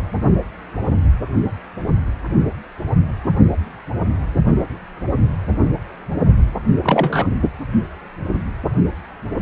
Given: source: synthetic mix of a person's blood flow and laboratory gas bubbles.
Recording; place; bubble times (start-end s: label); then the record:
Doppler ultrasound of blood flow; precordium
6.82-7.27 s: bubbles
From the record:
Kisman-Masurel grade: 113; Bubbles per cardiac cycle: 1 to 2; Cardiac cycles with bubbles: 1 to 10%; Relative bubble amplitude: loud (0.450 to 0.775); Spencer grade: 1 (occasional bubble signal discernible with the cardiac motion signal, with majority of cardiac periods free of bubbles); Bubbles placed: anywhere in the cardiac cycle